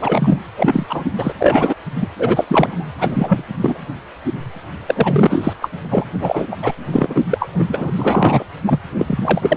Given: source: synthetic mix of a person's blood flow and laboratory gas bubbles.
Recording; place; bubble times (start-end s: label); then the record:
Doppler ultrasound of blood flow; precordium
0.00-0.38 s: bubbles
0.57-0.86 s: bubbles
0.89-1.05 s: bubbles
1.18-1.33 s: bubbles
1.40-1.76 s: bubbles
1.98-2.07 s: bubbles
2.19-2.44 s: bubbles
2.47-2.86 s: bubbles
2.98-3.45 s: bubbles
3.61-3.79 s: bubbles
4.86-5.54 s: bubbles
5.62-5.70 s: bubbles
5.90-6.04 s: bubbles
6.20-6.46 s: bubbles
6.51-6.56 s: bubbles
6.62-6.72 s: bubbles
6.92-7.27 s: bubbles
7.29-7.49 s: bubbles
7.58-7.65 s: bubbles
7.69-7.91 s: bubbles
7.97-8.44 s: bubbles
8.67-8.79 s: bubbles
8.98-9.57 s: bubbles
From the record:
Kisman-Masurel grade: 333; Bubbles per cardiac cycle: rolling drumbeat, 9 or more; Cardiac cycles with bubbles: 50 to 99%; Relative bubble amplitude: loud (0.450 to 0.775); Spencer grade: 3 (all of the cardiac periods contain showers or single bubble signals, but not dominating or overriding the cardiac motion signals); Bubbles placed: anywhere in the cardiac cycle